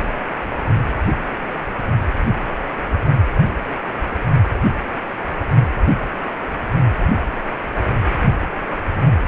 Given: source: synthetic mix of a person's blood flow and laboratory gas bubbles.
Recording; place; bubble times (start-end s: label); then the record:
Doppler ultrasound of blood flow; precordium
no bubbles
From the record:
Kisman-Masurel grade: 000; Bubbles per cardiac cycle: 0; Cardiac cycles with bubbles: 0%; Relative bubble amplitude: no bubbles discernible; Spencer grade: 0 (complete lack of bubble signals)